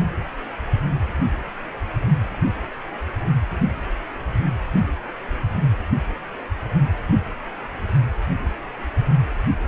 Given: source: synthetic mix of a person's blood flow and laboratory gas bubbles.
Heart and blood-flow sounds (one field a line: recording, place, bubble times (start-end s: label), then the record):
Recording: Doppler ultrasound of blood flow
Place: precordium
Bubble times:
4.67-4.81 s: bubbles
From the record:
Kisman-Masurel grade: 111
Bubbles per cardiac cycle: 1 to 2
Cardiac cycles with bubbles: 1 to 10%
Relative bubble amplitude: barely perceptible (0.100 to 0.250)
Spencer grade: 1 (occasional bubble signal discernible with the cardiac motion signal, with majority of cardiac periods free of bubbles)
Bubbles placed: anywhere in the cardiac cycle